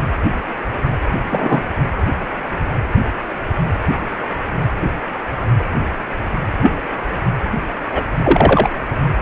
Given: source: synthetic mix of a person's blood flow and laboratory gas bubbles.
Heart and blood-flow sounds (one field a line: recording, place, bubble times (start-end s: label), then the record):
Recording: Doppler ultrasound of blood flow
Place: precordium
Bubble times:
1.30-1.62 s: bubbles
6.62-6.71 s: bubbles
7.91-8.02 s: bubbles
8.24-8.69 s: bubbles
From the record:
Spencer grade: 2 (many but less than half of the cardiac periods contain bubble signals, singularly or in groups)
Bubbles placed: anywhere in the cardiac cycle